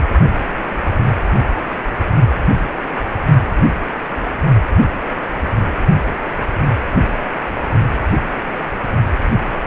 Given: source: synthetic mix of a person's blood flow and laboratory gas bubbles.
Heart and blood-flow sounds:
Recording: Doppler ultrasound of blood flow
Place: precordium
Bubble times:
no bubbles
From the record:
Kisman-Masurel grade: 000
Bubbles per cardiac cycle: 0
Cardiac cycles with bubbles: 0%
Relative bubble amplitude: no bubbles discernible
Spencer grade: 0 (complete lack of bubble signals)

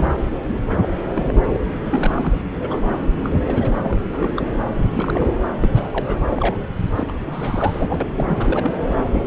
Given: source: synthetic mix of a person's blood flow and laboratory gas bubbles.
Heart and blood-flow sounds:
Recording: Doppler ultrasound of blood flow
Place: subclavian vein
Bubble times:
0.00-0.20 s: bubbles
0.47-0.59 s: bubbles
0.67-0.89 s: bubbles
1.14-1.45 s: bubbles
1.48-1.60 s: bubbles
1.89-2.42 s: bubbles
2.60-2.93 s: bubbles
3.12-4.01 s: bubbles
4.12-4.47 s: bubbles
4.76-4.88 s: bubbles
4.90-5.40 s: bubbles
5.61-5.69 s: bubbles
5.74-6.19 s: bubbles
6.30-6.57 s: bubbles
6.96-7.12 s: bubbles
7.26-8.10 s: bubbles
8.15-8.73 s: bubbles
8.87-9.04 s: bubbles
9.11-9.24 s: bubbles
From the record:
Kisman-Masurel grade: 332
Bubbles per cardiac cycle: rolling drumbeat, 9 or more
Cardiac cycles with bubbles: 50 to 99%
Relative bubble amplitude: moderate (0.250 to 0.450)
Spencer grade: 3 (all of the cardiac periods contain showers or single bubble signals, but not dominating or overriding the cardiac motion signals)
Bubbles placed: anywhere in the cardiac cycle

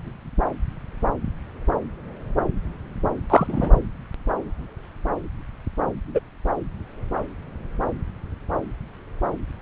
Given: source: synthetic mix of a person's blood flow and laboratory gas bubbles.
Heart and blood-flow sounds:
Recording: Doppler ultrasound of blood flow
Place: subclavian vein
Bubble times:
3.29-3.70 s: bubbles
6.14-6.19 s: bubbles
From the record:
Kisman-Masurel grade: 123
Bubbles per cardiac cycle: 1 to 2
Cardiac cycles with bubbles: 10 to 50%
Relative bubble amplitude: loud (0.450 to 0.775)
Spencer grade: 2 (many but less than half of the cardiac periods contain bubble signals, singularly or in groups)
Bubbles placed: anywhere in the cardiac cycle

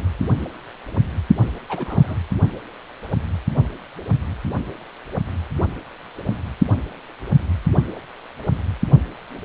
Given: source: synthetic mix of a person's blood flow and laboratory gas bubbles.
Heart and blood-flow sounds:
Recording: Doppler ultrasound of blood flow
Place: precordium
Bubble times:
1.36-1.49 s: bubbles
1.69-2.16 s: bubbles
From the record:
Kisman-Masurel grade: 211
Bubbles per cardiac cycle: several, 3 to 8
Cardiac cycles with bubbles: 1 to 10%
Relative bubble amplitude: barely perceptible (0.100 to 0.250)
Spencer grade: 1 (occasional bubble signal discernible with the cardiac motion signal, with majority of cardiac periods free of bubbles)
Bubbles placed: anywhere in the cardiac cycle

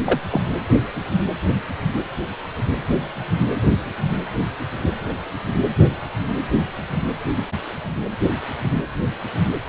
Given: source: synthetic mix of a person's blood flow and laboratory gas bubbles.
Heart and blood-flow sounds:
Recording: Doppler ultrasound of blood flow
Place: precordium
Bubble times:
0.05-0.21 s: bubbles
0.30-0.41 s: bubbles
From the record:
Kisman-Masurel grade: 122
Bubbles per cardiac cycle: 1 to 2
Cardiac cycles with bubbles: 10 to 50%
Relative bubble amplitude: moderate (0.250 to 0.450)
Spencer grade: 2 (many but less than half of the cardiac periods contain bubble signals, singularly or in groups)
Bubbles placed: anywhere in the cardiac cycle

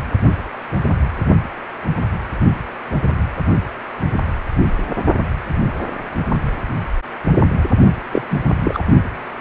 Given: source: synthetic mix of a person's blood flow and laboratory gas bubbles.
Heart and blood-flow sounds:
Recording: Doppler ultrasound of blood flow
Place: precordium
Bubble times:
8.12-8.22 s: bubbles
8.30-8.39 s: bubbles
8.64-8.82 s: bubbles
From the record:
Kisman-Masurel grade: 213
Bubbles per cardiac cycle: several, 3 to 8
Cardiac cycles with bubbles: 1 to 10%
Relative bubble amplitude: loud (0.450 to 0.775)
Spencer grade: 1 (occasional bubble signal discernible with the cardiac motion signal, with majority of cardiac periods free of bubbles)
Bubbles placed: only in the low amplitude regions of the cardiac cycle

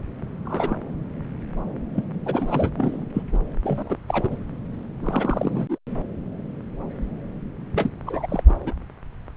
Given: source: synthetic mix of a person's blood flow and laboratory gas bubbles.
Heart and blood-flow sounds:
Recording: Doppler ultrasound of blood flow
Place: subclavian vein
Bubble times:
0.45-0.78 s: bubbles
1.94-2.17 s: bubbles
2.25-2.70 s: bubbles
2.77-3.06 s: bubbles
3.14-3.23 s: bubbles
3.33-3.38 s: bubbles
3.63-3.97 s: bubbles
4.08-4.28 s: bubbles
4.30-4.38 s: bubbles
5.01-5.78 s: bubbles
7.74-7.89 s: bubbles
8.06-8.43 s: bubbles
8.48-8.54 s: bubbles
8.66-8.73 s: bubbles
From the record:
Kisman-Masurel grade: 232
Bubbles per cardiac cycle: several, 3 to 8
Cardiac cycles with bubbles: 50 to 99%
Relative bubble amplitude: moderate (0.250 to 0.450)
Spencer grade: 3 (all of the cardiac periods contain showers or single bubble signals, but not dominating or overriding the cardiac motion signals)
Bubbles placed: anywhere in the cardiac cycle

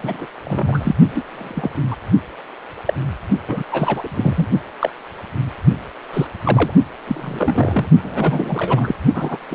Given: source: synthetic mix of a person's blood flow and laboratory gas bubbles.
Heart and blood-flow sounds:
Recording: Doppler ultrasound of blood flow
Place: precordium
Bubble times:
0.02-0.26 s: bubbles
0.45-0.95 s: bubbles
1.14-1.22 s: bubbles
1.28-1.79 s: bubbles
1.90-1.96 s: bubbles
2.87-2.94 s: bubbles
3.48-3.63 s: bubbles
3.71-4.47 s: bubbles
4.79-4.90 s: bubbles
6.13-6.27 s: bubbles
6.46-6.72 s: bubbles
7.07-7.89 s: bubbles
8.03-8.96 s: bubbles
9.14-9.38 s: bubbles
9.49-9.55 s: bubbles
From the record:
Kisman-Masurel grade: 232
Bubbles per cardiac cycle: several, 3 to 8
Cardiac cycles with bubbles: 50 to 99%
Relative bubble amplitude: moderate (0.250 to 0.450)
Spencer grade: 3 (all of the cardiac periods contain showers or single bubble signals, but not dominating or overriding the cardiac motion signals)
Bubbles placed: only in the low amplitude regions of the cardiac cycle

